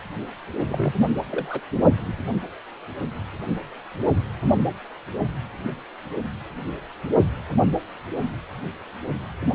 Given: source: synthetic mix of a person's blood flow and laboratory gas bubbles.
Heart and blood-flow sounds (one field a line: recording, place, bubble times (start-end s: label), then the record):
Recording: Doppler ultrasound of blood flow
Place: precordium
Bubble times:
0.66-0.93 s: bubbles
1.00-1.04 s: bubbles
1.31-1.61 s: bubbles
From the record:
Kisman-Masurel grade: 211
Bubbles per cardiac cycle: several, 3 to 8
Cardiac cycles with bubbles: 1 to 10%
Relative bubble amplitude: barely perceptible (0.100 to 0.250)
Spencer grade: 1 (occasional bubble signal discernible with the cardiac motion signal, with majority of cardiac periods free of bubbles)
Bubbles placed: only in the low amplitude regions of the cardiac cycle